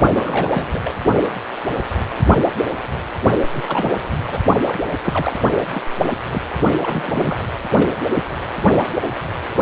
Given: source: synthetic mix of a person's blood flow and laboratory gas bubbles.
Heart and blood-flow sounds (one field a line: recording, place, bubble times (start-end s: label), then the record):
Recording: Doppler ultrasound of blood flow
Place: precordium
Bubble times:
0.12-0.93 s: bubbles
3.52-3.65 s: bubbles
3.68-3.96 s: bubbles
4.27-4.39 s: bubbles
4.63-4.78 s: bubbles
5.04-5.36 s: bubbles
5.74-5.85 s: bubbles
6.03-6.10 s: bubbles
6.33-6.42 s: bubbles
6.82-7.45 s: bubbles
7.71-7.96 s: bubbles
8.15-8.23 s: bubbles
From the record:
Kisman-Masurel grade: 232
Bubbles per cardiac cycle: several, 3 to 8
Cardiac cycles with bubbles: 50 to 99%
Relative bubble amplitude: moderate (0.250 to 0.450)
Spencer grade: 3 (all of the cardiac periods contain showers or single bubble signals, but not dominating or overriding the cardiac motion signals)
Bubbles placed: only in the low amplitude regions of the cardiac cycle